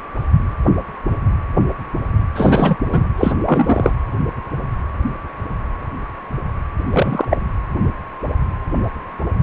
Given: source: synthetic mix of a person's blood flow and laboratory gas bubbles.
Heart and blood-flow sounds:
Doppler ultrasound of blood flow; precordium
2.35-2.76 s: bubbles
2.90-3.04 s: bubbles
3.17-3.33 s: bubbles
3.46-3.92 s: bubbles
6.91-7.25 s: bubbles
7.29-7.38 s: bubbles
From the record:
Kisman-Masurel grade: 223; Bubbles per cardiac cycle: several, 3 to 8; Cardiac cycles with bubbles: 10 to 50%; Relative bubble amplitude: loud (0.450 to 0.775); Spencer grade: 2 (many but less than half of the cardiac periods contain bubble signals, singularly or in groups); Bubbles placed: anywhere in the cardiac cycle

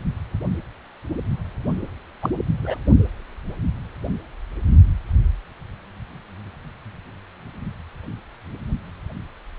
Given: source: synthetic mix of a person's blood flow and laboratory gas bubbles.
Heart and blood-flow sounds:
Doppler ultrasound of blood flow; precordium
2.22-2.29 s: bubbles
2.62-2.75 s: bubbles
From the record:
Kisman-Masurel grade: 222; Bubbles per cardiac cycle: several, 3 to 8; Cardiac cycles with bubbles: 10 to 50%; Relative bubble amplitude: moderate (0.250 to 0.450); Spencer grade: 2 (many but less than half of the cardiac periods contain bubble signals, singularly or in groups); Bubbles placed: only in the low amplitude regions of the cardiac cycle

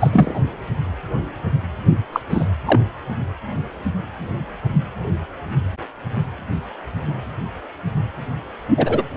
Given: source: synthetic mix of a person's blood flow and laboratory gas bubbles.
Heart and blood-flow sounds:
Doppler ultrasound of blood flow; precordium
0.01-0.41 s: bubbles
2.12-2.20 s: bubbles
2.29-2.44 s: bubbles
2.65-2.79 s: bubbles
8.77-9.03 s: bubbles
From the record:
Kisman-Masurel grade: 223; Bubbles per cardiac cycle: several, 3 to 8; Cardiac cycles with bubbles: 10 to 50%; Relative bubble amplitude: loud (0.450 to 0.775); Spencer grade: 2 (many but less than half of the cardiac periods contain bubble signals, singularly or in groups); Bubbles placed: only in the low amplitude regions of the cardiac cycle

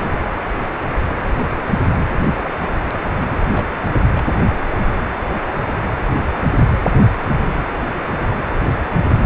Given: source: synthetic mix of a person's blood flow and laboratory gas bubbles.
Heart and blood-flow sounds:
Doppler ultrasound of blood flow; precordium
3.20-3.39 s: bubbles
3.50-3.67 s: bubbles
3.71-3.92 s: bubbles
4.13-4.24 s: bubbles
From the record:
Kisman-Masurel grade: 211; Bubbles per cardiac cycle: several, 3 to 8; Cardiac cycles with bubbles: 1 to 10%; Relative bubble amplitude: barely perceptible (0.100 to 0.250); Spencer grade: 1 (occasional bubble signal discernible with the cardiac motion signal, with majority of cardiac periods free of bubbles); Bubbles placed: anywhere in the cardiac cycle

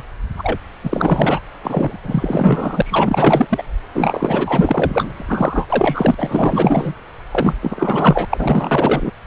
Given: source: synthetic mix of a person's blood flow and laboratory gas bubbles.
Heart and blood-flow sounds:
Doppler ultrasound of blood flow; subclavian vein
0.00-0.02 s: bubbles
0.37-0.58 s: bubbles
0.83-1.40 s: bubbles
1.61-1.97 s: bubbles
2.03-3.46 s: bubbles
3.49-3.62 s: bubbles
3.94-5.66 s: bubbles
5.69-6.14 s: bubbles
6.18-6.94 s: bubbles
7.31-7.57 s: bubbles
7.62-8.25 s: bubbles
8.29-9.12 s: bubbles
From the record:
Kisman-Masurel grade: 444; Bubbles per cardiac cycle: continuous sound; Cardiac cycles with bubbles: 100%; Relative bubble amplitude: maximal (0.775 to 0.999); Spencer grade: 4 (maximum detectable bubble signal sounding continuously throughout systole and diastole of every cardiac period, and overriding the amplitude of the normal cardiac signals); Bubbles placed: anywhere in the cardiac cycle

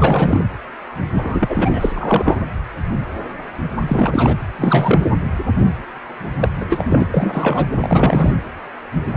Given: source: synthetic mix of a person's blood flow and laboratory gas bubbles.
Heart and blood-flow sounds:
Doppler ultrasound of blood flow; precordium
0.00-0.41 s: bubbles
1.13-2.38 s: bubbles
3.88-4.40 s: bubbles
4.57-5.03 s: bubbles
6.39-6.48 s: bubbles
6.60-6.65 s: bubbles
6.68-7.06 s: bubbles
7.11-7.66 s: bubbles
7.80-8.31 s: bubbles
From the record:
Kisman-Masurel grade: 333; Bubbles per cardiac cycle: rolling drumbeat, 9 or more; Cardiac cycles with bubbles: 50 to 99%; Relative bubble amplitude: loud (0.450 to 0.775); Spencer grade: 3 (all of the cardiac periods contain showers or single bubble signals, but not dominating or overriding the cardiac motion signals); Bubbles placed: anywhere in the cardiac cycle

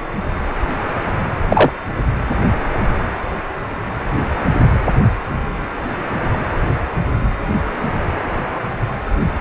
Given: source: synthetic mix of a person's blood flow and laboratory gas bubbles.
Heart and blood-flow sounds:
Doppler ultrasound of blood flow; precordium
1.49-1.71 s: bubbles
From the record:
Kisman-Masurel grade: 113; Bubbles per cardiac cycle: 1 to 2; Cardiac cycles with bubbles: 1 to 10%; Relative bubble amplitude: loud (0.450 to 0.775); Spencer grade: 1 (occasional bubble signal discernible with the cardiac motion signal, with majority of cardiac periods free of bubbles); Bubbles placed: anywhere in the cardiac cycle

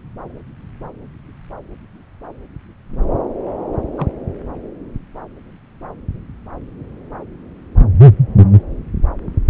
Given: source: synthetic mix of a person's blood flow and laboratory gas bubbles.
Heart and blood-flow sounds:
Doppler ultrasound of blood flow; subclavian vein
3.97-4.07 s: bubbles
From the record:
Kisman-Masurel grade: 112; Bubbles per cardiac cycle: 1 to 2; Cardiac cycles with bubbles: 1 to 10%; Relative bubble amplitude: moderate (0.250 to 0.450); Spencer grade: 1 (occasional bubble signal discernible with the cardiac motion signal, with majority of cardiac periods free of bubbles); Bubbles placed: anywhere in the cardiac cycle

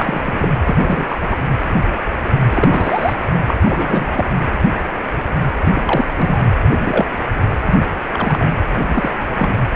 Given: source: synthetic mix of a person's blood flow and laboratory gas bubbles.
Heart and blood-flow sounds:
Doppler ultrasound of blood flow; precordium
0.00-0.50 s: bubbles
0.64-1.05 s: bubbles
1.08-1.18 s: bubbles
1.30-1.39 s: bubbles
2.51-3.13 s: bubbles
3.48-4.29 s: bubbles
5.58-5.82 s: bubbles
5.85-6.06 s: bubbles
6.17-6.40 s: bubbles
6.83-7.06 s: bubbles
7.67-7.80 s: bubbles
8.13-8.46 s: bubbles
8.92-9.11 s: bubbles
9.37-9.49 s: bubbles
From the record:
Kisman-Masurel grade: 232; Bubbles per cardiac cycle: several, 3 to 8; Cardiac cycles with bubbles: 50 to 99%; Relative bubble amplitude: moderate (0.250 to 0.450); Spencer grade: 3 (all of the cardiac periods contain showers or single bubble signals, but not dominating or overriding the cardiac motion signals); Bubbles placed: anywhere in the cardiac cycle

